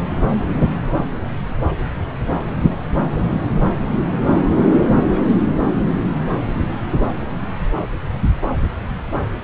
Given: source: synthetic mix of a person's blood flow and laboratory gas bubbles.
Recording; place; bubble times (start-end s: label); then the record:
Doppler ultrasound of blood flow; subclavian vein
5.14-5.21 s: bubbles
From the record:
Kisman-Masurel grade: 111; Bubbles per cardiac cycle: 1 to 2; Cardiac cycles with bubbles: 1 to 10%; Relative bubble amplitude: barely perceptible (0.100 to 0.250); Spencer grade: 1 (occasional bubble signal discernible with the cardiac motion signal, with majority of cardiac periods free of bubbles); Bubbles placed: anywhere in the cardiac cycle